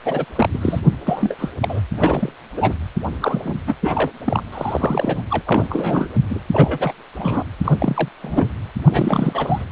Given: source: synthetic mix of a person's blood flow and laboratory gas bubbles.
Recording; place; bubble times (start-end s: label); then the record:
Doppler ultrasound of blood flow; precordium
0.05-0.25 s: bubbles
0.35-0.48 s: bubbles
0.54-0.58 s: bubbles
0.61-0.79 s: bubbles
1.06-1.35 s: bubbles
1.39-1.49 s: bubbles
1.61-1.80 s: bubbles
1.97-2.32 s: bubbles
2.53-2.74 s: bubbles
3.21-3.55 s: bubbles
3.66-3.75 s: bubbles
3.82-4.09 s: bubbles
4.25-4.43 s: bubbles
4.52-5.22 s: bubbles
5.30-5.42 s: bubbles
5.46-5.67 s: bubbles
5.69-6.08 s: bubbles
6.29-6.40 s: bubbles
6.52-6.93 s: bubbles
7.17-7.43 s: bubbles
7.64-7.76 s: bubbles
7.79-8.08 s: bubbles
8.22-8.49 s: bubbles
8.85-9.65 s: bubbles
From the record:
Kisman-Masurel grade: 333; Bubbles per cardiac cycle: rolling drumbeat, 9 or more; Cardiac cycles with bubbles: 50 to 99%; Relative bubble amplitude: loud (0.450 to 0.775); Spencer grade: 3 (all of the cardiac periods contain showers or single bubble signals, but not dominating or overriding the cardiac motion signals); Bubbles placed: anywhere in the cardiac cycle